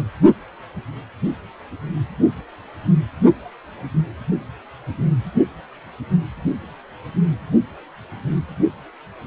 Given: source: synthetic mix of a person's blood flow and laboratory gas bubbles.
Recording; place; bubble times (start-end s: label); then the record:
Doppler ultrasound of blood flow; precordium
0.00-0.05 s: bubbles
From the record:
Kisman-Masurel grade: 221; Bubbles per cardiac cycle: several, 3 to 8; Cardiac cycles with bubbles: 10 to 50%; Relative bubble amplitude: barely perceptible (0.100 to 0.250); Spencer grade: 2 (many but less than half of the cardiac periods contain bubble signals, singularly or in groups); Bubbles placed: anywhere in the cardiac cycle